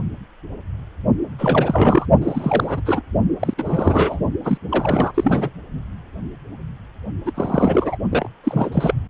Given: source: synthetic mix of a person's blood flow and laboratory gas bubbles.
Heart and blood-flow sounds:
Doppler ultrasound of blood flow; precordium
1.38-2.06 s: bubbles
2.21-2.81 s: bubbles
2.85-3.02 s: bubbles
3.40-3.54 s: bubbles
3.58-4.19 s: bubbles
4.45-4.58 s: bubbles
4.70-5.50 s: bubbles
7.25-7.32 s: bubbles
7.34-7.97 s: bubbles
8.11-8.27 s: bubbles
8.43-8.69 s: bubbles
8.72-8.94 s: bubbles
From the record:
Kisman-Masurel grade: 333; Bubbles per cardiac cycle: rolling drumbeat, 9 or more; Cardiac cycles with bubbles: 50 to 99%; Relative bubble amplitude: loud (0.450 to 0.775); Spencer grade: 3 (all of the cardiac periods contain showers or single bubble signals, but not dominating or overriding the cardiac motion signals); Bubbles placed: only in the low amplitude regions of the cardiac cycle

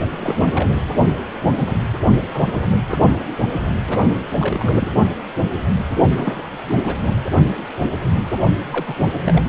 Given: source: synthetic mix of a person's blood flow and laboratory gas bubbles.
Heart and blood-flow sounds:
Doppler ultrasound of blood flow; precordium
0.00-0.67 s: bubbles
2.33-2.48 s: bubbles
2.86-3.10 s: bubbles
3.87-4.02 s: bubbles
4.38-4.73 s: bubbles
4.81-4.88 s: bubbles
6.16-6.42 s: bubbles
6.68-6.74 s: bubbles
6.87-6.95 s: bubbles
7.07-7.14 s: bubbles
8.71-8.95 s: bubbles
9.12-9.49 s: bubbles
From the record:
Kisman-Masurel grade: 232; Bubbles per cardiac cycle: several, 3 to 8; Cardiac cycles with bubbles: 50 to 99%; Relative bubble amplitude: moderate (0.250 to 0.450); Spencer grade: 3 (all of the cardiac periods contain showers or single bubble signals, but not dominating or overriding the cardiac motion signals); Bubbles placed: only in the low amplitude regions of the cardiac cycle

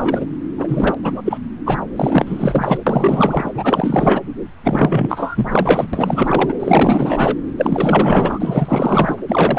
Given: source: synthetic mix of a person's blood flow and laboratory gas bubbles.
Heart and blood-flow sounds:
Doppler ultrasound of blood flow; subclavian vein
0.00-0.26 s: bubbles
0.57-0.94 s: bubbles
1.02-1.38 s: bubbles
1.66-1.78 s: bubbles
1.96-2.79 s: bubbles
2.87-3.51 s: bubbles
3.54-4.21 s: bubbles
4.63-5.88 s: bubbles
5.93-6.55 s: bubbles
6.59-7.36 s: bubbles
7.57-9.16 s: bubbles
9.28-9.59 s: bubbles
From the record:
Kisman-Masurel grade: 444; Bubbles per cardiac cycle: continuous sound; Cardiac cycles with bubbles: 100%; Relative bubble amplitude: maximal (0.775 to 0.999); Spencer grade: 4 (maximum detectable bubble signal sounding continuously throughout systole and diastole of every cardiac period, and overriding the amplitude of the normal cardiac signals); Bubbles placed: anywhere in the cardiac cycle

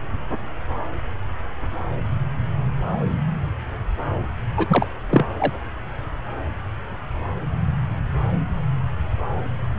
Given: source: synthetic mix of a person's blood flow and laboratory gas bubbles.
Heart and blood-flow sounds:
Doppler ultrasound of blood flow; subclavian vein
4.57-4.88 s: bubbles
5.11-5.25 s: bubbles
5.39-5.53 s: bubbles
From the record:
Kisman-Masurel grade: 223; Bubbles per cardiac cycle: several, 3 to 8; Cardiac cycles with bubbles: 10 to 50%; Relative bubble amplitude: loud (0.450 to 0.775); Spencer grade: 2 (many but less than half of the cardiac periods contain bubble signals, singularly or in groups); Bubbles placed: anywhere in the cardiac cycle

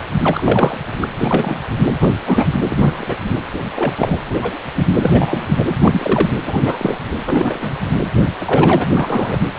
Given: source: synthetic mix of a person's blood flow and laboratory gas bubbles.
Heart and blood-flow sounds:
Doppler ultrasound of blood flow; precordium
0.22-0.77 s: bubbles
1.01-1.06 s: bubbles
1.21-1.59 s: bubbles
2.00-2.14 s: bubbles
2.25-2.45 s: bubbles
2.68-3.15 s: bubbles
3.75-4.19 s: bubbles
4.30-4.34 s: bubbles
4.41-4.57 s: bubbles
4.74-4.94 s: bubbles
5.00-5.46 s: bubbles
5.58-5.65 s: bubbles
5.82-6.27 s: bubbles
6.46-6.98 s: bubbles
7.25-7.76 s: bubbles
8.38-8.84 s: bubbles
8.89-9.40 s: bubbles
From the record:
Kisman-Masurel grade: 243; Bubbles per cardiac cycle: several, 3 to 8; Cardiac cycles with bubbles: 100%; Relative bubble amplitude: loud (0.450 to 0.775); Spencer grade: 3 (all of the cardiac periods contain showers or single bubble signals, but not dominating or overriding the cardiac motion signals); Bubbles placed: anywhere in the cardiac cycle

